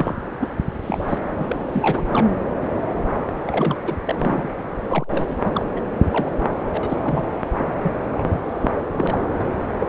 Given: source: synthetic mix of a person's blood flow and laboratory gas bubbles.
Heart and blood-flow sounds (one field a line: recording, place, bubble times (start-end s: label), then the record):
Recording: Doppler ultrasound of blood flow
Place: subclavian vein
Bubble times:
0.00-0.14 s: bubbles
0.40-0.49 s: bubbles
0.82-1.18 s: bubbles
1.38-1.45 s: bubbles
1.48-1.56 s: bubbles
1.69-2.31 s: bubbles
3.47-3.78 s: bubbles
3.83-3.95 s: bubbles
4.05-4.50 s: bubbles
4.88-5.36 s: bubbles
5.45-5.65 s: bubbles
5.75-5.81 s: bubbles
6.12-6.29 s: bubbles
6.65-7.01 s: bubbles
7.04-7.25 s: bubbles
7.58-7.74 s: bubbles
7.83-7.92 s: bubbles
8.12-8.26 s: bubbles
8.29-8.38 s: bubbles
8.59-8.70 s: bubbles
8.92-9.20 s: bubbles
9.38-9.50 s: bubbles
9.79-9.87 s: bubbles
From the record:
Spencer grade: 3 (all of the cardiac periods contain showers or single bubble signals, but not dominating or overriding the cardiac motion signals)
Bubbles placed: anywhere in the cardiac cycle